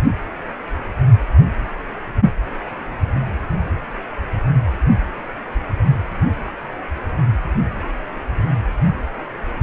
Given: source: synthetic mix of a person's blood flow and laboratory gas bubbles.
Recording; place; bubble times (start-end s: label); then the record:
Doppler ultrasound of blood flow; precordium
no bubbles
From the record:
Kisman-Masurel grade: 000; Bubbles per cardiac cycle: 0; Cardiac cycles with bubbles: 0%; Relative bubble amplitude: no bubbles discernible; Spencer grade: 0 (complete lack of bubble signals)